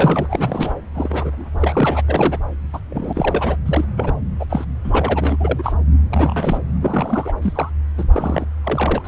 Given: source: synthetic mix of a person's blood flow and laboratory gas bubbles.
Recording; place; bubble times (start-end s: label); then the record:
Doppler ultrasound of blood flow; subclavian vein
0.00-0.75 s: bubbles
0.94-1.48 s: bubbles
1.58-2.02 s: bubbles
2.08-2.39 s: bubbles
2.73-2.80 s: bubbles
2.89-3.56 s: bubbles
3.65-3.85 s: bubbles
3.97-4.18 s: bubbles
4.39-4.46 s: bubbles
4.49-4.65 s: bubbles
4.84-5.38 s: bubbles
5.40-5.74 s: bubbles
6.10-6.62 s: bubbles
6.81-7.33 s: bubbles
7.41-7.70 s: bubbles
7.97-8.04 s: bubbles
8.12-8.46 s: bubbles
8.63-9.08 s: bubbles
From the record:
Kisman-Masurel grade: 243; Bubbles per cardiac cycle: several, 3 to 8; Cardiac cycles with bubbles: 100%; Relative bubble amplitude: loud (0.450 to 0.775); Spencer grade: 3 (all of the cardiac periods contain showers or single bubble signals, but not dominating or overriding the cardiac motion signals); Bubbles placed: anywhere in the cardiac cycle